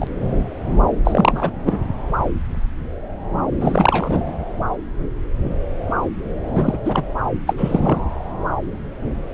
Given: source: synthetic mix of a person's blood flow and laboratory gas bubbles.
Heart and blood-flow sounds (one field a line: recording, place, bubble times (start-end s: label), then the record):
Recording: Doppler ultrasound of blood flow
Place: subclavian vein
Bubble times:
0.00-0.07 s: bubbles
1.04-1.50 s: bubbles
1.65-1.78 s: bubbles
3.60-4.20 s: bubbles
6.54-6.79 s: bubbles
6.85-7.02 s: bubbles
7.46-7.98 s: bubbles
From the record:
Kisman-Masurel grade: 223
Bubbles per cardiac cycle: several, 3 to 8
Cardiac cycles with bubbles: 10 to 50%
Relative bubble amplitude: loud (0.450 to 0.775)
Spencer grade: 2 (many but less than half of the cardiac periods contain bubble signals, singularly or in groups)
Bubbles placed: anywhere in the cardiac cycle